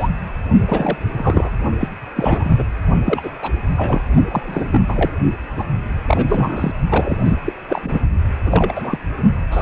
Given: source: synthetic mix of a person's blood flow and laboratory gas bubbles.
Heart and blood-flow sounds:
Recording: Doppler ultrasound of blood flow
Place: precordium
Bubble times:
0.00-0.09 s: bubbles
0.67-0.97 s: bubbles
1.09-1.50 s: bubbles
1.79-1.88 s: bubbles
2.16-2.63 s: bubbles
3.06-3.30 s: bubbles
3.42-3.52 s: bubbles
3.65-4.02 s: bubbles
4.28-4.66 s: bubbles
4.71-5.11 s: bubbles
5.56-5.66 s: bubbles
6.07-6.73 s: bubbles
6.90-7.22 s: bubbles
7.25-7.42 s: bubbles
7.46-7.53 s: bubbles
7.69-8.01 s: bubbles
8.45-8.72 s: bubbles
8.75-8.98 s: bubbles
9.51-9.62 s: bubbles
From the record:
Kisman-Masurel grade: 343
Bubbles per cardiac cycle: rolling drumbeat, 9 or more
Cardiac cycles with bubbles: 100%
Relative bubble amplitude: loud (0.450 to 0.775)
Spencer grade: 3 (all of the cardiac periods contain showers or single bubble signals, but not dominating or overriding the cardiac motion signals)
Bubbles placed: only in the low amplitude regions of the cardiac cycle

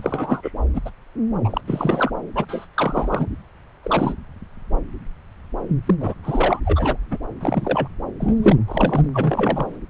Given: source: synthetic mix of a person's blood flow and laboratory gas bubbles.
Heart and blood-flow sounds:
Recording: Doppler ultrasound of blood flow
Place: subclavian vein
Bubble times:
0.00-0.52 s: bubbles
0.73-0.80 s: bubbles
0.85-0.90 s: bubbles
1.44-1.61 s: bubbles
1.67-2.11 s: bubbles
2.35-2.45 s: bubbles
2.48-2.66 s: bubbles
2.75-3.26 s: bubbles
3.83-4.14 s: bubbles
5.85-5.95 s: bubbles
6.00-6.14 s: bubbles
6.23-6.60 s: bubbles
6.65-6.97 s: bubbles
7.10-7.18 s: bubbles
7.41-7.88 s: bubbles
8.20-8.56 s: bubbles
8.68-9.08 s: bubbles
9.14-9.77 s: bubbles
From the record:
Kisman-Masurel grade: 233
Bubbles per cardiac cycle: several, 3 to 8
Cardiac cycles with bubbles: 50 to 99%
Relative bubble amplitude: loud (0.450 to 0.775)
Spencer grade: 3 (all of the cardiac periods contain showers or single bubble signals, but not dominating or overriding the cardiac motion signals)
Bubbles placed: anywhere in the cardiac cycle

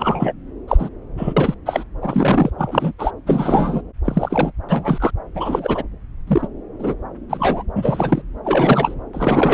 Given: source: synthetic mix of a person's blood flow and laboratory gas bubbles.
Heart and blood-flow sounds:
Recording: Doppler ultrasound of blood flow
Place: subclavian vein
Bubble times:
0.00-0.33 s: bubbles
0.68-0.90 s: bubbles
1.17-1.33 s: bubbles
1.36-1.54 s: bubbles
1.65-1.84 s: bubbles
2.02-2.50 s: bubbles
2.57-2.92 s: bubbles
2.98-3.11 s: bubbles
3.26-3.81 s: bubbles
4.04-4.52 s: bubbles
4.69-5.11 s: bubbles
5.35-5.83 s: bubbles
6.27-6.48 s: bubbles
6.79-6.95 s: bubbles
7.29-7.63 s: bubbles
7.76-8.22 s: bubbles
8.44-8.95 s: bubbles
9.13-9.54 s: bubbles
From the record:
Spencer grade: 3 (all of the cardiac periods contain showers or single bubble signals, but not dominating or overriding the cardiac motion signals)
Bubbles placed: anywhere in the cardiac cycle

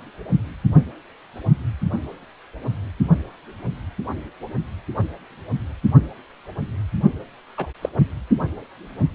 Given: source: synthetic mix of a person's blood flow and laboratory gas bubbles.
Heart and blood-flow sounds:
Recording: Doppler ultrasound of blood flow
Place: precordium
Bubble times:
7.57-7.67 s: bubbles
7.81-7.89 s: bubbles
From the record:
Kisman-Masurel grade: 112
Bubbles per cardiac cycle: 1 to 2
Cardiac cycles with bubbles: 1 to 10%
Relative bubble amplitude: moderate (0.250 to 0.450)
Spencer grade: 1 (occasional bubble signal discernible with the cardiac motion signal, with majority of cardiac periods free of bubbles)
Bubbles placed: only in the low amplitude regions of the cardiac cycle

